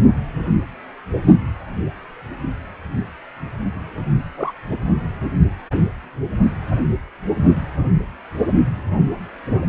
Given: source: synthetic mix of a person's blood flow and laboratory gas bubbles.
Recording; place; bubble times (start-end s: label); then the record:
Doppler ultrasound of blood flow; precordium
4.37-4.52 s: bubbles
From the record:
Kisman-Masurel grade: 112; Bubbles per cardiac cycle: 1 to 2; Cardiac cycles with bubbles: 1 to 10%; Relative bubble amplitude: moderate (0.250 to 0.450); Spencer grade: 1 (occasional bubble signal discernible with the cardiac motion signal, with majority of cardiac periods free of bubbles); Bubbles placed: only in the low amplitude regions of the cardiac cycle